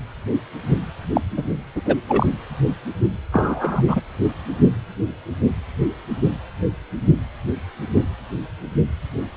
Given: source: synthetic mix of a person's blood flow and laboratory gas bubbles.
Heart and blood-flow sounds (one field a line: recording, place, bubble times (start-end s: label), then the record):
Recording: Doppler ultrasound of blood flow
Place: precordium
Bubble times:
1.15-1.21 s: bubbles
1.36-1.44 s: bubbles
1.75-1.82 s: bubbles
1.85-1.96 s: bubbles
2.07-2.26 s: bubbles
3.32-4.00 s: bubbles
From the record:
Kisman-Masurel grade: 223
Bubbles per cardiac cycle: several, 3 to 8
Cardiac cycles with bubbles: 10 to 50%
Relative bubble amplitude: loud (0.450 to 0.775)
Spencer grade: 2 (many but less than half of the cardiac periods contain bubble signals, singularly or in groups)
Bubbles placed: anywhere in the cardiac cycle